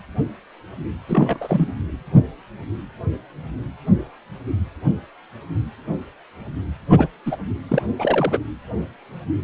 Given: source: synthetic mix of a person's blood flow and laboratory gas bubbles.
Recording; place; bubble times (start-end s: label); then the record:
Doppler ultrasound of blood flow; precordium
1.08-1.72 s: bubbles
6.89-7.08 s: bubbles
7.25-7.37 s: bubbles
7.69-7.82 s: bubbles
7.98-8.38 s: bubbles
From the record:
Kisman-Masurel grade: 222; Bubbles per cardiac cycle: several, 3 to 8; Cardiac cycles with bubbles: 10 to 50%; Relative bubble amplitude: moderate (0.250 to 0.450); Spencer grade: 2 (many but less than half of the cardiac periods contain bubble signals, singularly or in groups); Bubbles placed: anywhere in the cardiac cycle